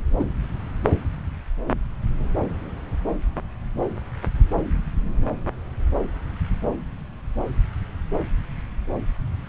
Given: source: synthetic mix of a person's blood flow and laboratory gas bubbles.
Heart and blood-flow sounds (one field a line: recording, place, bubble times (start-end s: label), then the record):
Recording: Doppler ultrasound of blood flow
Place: subclavian vein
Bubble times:
0.19-0.24 s: bubbles
From the record:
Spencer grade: 1 (occasional bubble signal discernible with the cardiac motion signal, with majority of cardiac periods free of bubbles)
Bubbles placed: anywhere in the cardiac cycle